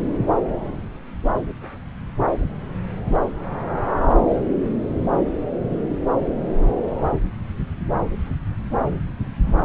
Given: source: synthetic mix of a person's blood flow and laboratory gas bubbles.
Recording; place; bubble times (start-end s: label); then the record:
Doppler ultrasound of blood flow; subclavian vein
4.29-4.38 s: bubbles
From the record:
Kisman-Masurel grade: 111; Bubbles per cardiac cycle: 1 to 2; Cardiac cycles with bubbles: 1 to 10%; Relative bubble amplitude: barely perceptible (0.100 to 0.250); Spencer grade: 1 (occasional bubble signal discernible with the cardiac motion signal, with majority of cardiac periods free of bubbles); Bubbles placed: anywhere in the cardiac cycle